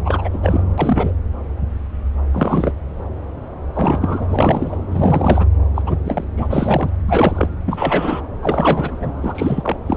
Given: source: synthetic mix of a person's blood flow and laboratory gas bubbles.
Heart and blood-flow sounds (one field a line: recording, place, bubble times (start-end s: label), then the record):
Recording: Doppler ultrasound of blood flow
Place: subclavian vein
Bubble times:
0.04-0.29 s: bubbles
0.33-0.38 s: bubbles
0.42-0.63 s: bubbles
0.78-1.12 s: bubbles
2.33-2.73 s: bubbles
3.75-4.78 s: bubbles
4.90-5.47 s: bubbles
5.75-5.82 s: bubbles
5.86-5.98 s: bubbles
6.04-6.25 s: bubbles
6.37-6.47 s: bubbles
6.50-6.95 s: bubbles
7.06-7.49 s: bubbles
7.65-8.21 s: bubbles
8.42-9.12 s: bubbles
9.21-9.78 s: bubbles
9.86-9.97 s: bubbles
From the record:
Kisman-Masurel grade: 333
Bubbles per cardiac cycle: rolling drumbeat, 9 or more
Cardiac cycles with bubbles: 50 to 99%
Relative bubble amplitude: loud (0.450 to 0.775)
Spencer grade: 3 (all of the cardiac periods contain showers or single bubble signals, but not dominating or overriding the cardiac motion signals)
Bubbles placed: anywhere in the cardiac cycle